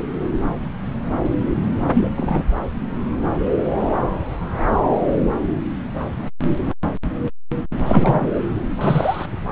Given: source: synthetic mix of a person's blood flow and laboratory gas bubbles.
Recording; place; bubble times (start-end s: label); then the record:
Doppler ultrasound of blood flow; subclavian vein
1.94-2.09 s: bubbles
2.17-2.44 s: bubbles
7.86-8.31 s: bubbles
8.80-9.26 s: bubbles
From the record:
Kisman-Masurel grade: 123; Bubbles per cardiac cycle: 1 to 2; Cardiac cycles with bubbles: 10 to 50%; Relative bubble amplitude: loud (0.450 to 0.775); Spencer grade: 2 (many but less than half of the cardiac periods contain bubble signals, singularly or in groups); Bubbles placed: anywhere in the cardiac cycle